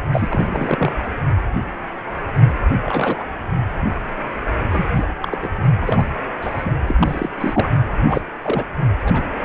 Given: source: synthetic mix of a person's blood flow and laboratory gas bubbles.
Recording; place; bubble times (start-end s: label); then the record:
Doppler ultrasound of blood flow; precordium
0.12-0.27 s: bubbles
0.30-0.93 s: bubbles
1.03-1.08 s: bubbles
2.83-3.25 s: bubbles
4.70-4.91 s: bubbles
4.95-5.06 s: bubbles
5.22-5.36 s: bubbles
5.42-5.52 s: bubbles
5.81-6.04 s: bubbles
6.41-6.73 s: bubbles
6.88-6.95 s: bubbles
6.99-7.29 s: bubbles
7.40-7.71 s: bubbles
8.05-8.31 s: bubbles
8.42-8.64 s: bubbles
9.02-9.27 s: bubbles
From the record:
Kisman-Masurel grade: 232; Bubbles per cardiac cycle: several, 3 to 8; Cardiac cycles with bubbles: 50 to 99%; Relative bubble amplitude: moderate (0.250 to 0.450); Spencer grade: 3 (all of the cardiac periods contain showers or single bubble signals, but not dominating or overriding the cardiac motion signals); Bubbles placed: anywhere in the cardiac cycle